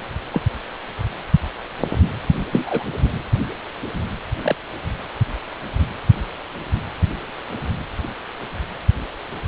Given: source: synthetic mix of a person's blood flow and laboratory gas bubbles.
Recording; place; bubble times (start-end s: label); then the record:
Doppler ultrasound of blood flow; precordium
0.32-0.41 s: bubbles
2.50-2.84 s: bubbles
4.43-4.56 s: bubbles
From the record:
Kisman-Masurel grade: 122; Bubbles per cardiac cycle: 1 to 2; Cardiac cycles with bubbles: 10 to 50%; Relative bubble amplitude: moderate (0.250 to 0.450); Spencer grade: 2 (many but less than half of the cardiac periods contain bubble signals, singularly or in groups); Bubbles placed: anywhere in the cardiac cycle